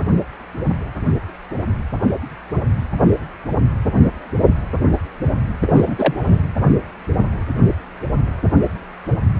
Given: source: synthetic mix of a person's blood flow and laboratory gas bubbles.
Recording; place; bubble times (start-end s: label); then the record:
Doppler ultrasound of blood flow; precordium
5.61-6.14 s: bubbles
6.17-6.42 s: bubbles
From the record:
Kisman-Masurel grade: 223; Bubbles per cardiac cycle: several, 3 to 8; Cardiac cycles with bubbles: 10 to 50%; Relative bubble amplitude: loud (0.450 to 0.775); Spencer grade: 2 (many but less than half of the cardiac periods contain bubble signals, singularly or in groups); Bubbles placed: only in the low amplitude regions of the cardiac cycle